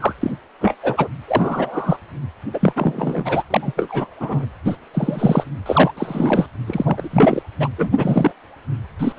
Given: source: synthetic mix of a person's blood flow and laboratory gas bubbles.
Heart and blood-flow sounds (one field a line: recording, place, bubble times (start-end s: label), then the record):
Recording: Doppler ultrasound of blood flow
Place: precordium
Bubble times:
0.00-0.13 s: bubbles
0.22-0.31 s: bubbles
0.60-0.75 s: bubbles
0.82-1.08 s: bubbles
1.28-1.97 s: bubbles
2.54-2.73 s: bubbles
2.75-3.43 s: bubbles
3.50-3.72 s: bubbles
3.76-4.15 s: bubbles
4.20-4.46 s: bubbles
4.65-4.76 s: bubbles
4.93-5.43 s: bubbles
5.66-5.92 s: bubbles
5.97-6.47 s: bubbles
6.66-7.43 s: bubbles
7.59-7.69 s: bubbles
7.77-7.90 s: bubbles
7.97-8.33 s: bubbles
8.99-9.12 s: bubbles
9.16-9.19 s: bubbles
From the record:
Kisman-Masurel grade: 243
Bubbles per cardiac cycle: several, 3 to 8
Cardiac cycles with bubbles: 100%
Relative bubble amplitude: loud (0.450 to 0.775)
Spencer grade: 3 (all of the cardiac periods contain showers or single bubble signals, but not dominating or overriding the cardiac motion signals)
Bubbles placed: anywhere in the cardiac cycle